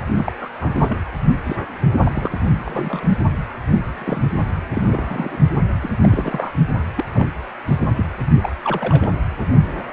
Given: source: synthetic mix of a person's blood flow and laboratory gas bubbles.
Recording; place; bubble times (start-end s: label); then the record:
Doppler ultrasound of blood flow; precordium
0.17-0.32 s: bubbles
0.40-0.48 s: bubbles
0.60-0.98 s: bubbles
1.44-1.56 s: bubbles
2.03-2.29 s: bubbles
2.65-3.16 s: bubbles
3.94-4.30 s: bubbles
4.75-5.38 s: bubbles
5.82-5.91 s: bubbles
6.02-6.51 s: bubbles
6.96-7.05 s: bubbles
7.14-7.27 s: bubbles
7.68-7.93 s: bubbles
7.97-8.05 s: bubbles
8.41-8.53 s: bubbles
8.63-9.13 s: bubbles
9.64-9.82 s: bubbles
From the record:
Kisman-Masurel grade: 232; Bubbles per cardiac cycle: several, 3 to 8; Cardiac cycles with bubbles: 50 to 99%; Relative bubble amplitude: moderate (0.250 to 0.450); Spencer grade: 3 (all of the cardiac periods contain showers or single bubble signals, but not dominating or overriding the cardiac motion signals); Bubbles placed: only in the low amplitude regions of the cardiac cycle